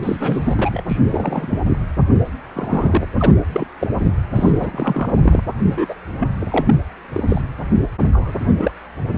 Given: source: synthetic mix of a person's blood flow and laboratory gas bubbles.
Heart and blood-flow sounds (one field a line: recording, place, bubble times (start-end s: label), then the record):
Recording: Doppler ultrasound of blood flow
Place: precordium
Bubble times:
0.02-0.82 s: bubbles
0.88-0.97 s: bubbles
1.11-1.59 s: bubbles
1.66-1.77 s: bubbles
2.53-3.08 s: bubbles
3.19-3.34 s: bubbles
3.52-3.67 s: bubbles
3.80-3.88 s: bubbles
4.00-4.12 s: bubbles
4.35-5.43 s: bubbles
5.69-5.95 s: bubbles
6.19-6.29 s: bubbles
6.50-6.75 s: bubbles
7.12-7.24 s: bubbles
7.29-7.42 s: bubbles
8.12-8.71 s: bubbles
From the record:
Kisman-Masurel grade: 242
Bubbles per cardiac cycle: several, 3 to 8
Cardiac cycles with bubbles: 100%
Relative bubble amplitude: moderate (0.250 to 0.450)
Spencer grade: 3 (all of the cardiac periods contain showers or single bubble signals, but not dominating or overriding the cardiac motion signals)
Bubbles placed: anywhere in the cardiac cycle